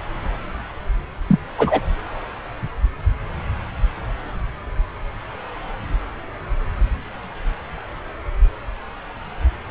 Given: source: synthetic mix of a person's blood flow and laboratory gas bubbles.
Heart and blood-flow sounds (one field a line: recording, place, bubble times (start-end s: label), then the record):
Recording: Doppler ultrasound of blood flow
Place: subclavian vein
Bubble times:
1.27-1.39 s: bubbles
1.58-1.80 s: bubbles
From the record:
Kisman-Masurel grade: 113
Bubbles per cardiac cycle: 1 to 2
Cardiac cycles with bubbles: 1 to 10%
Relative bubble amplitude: loud (0.450 to 0.775)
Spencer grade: 1 (occasional bubble signal discernible with the cardiac motion signal, with majority of cardiac periods free of bubbles)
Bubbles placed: anywhere in the cardiac cycle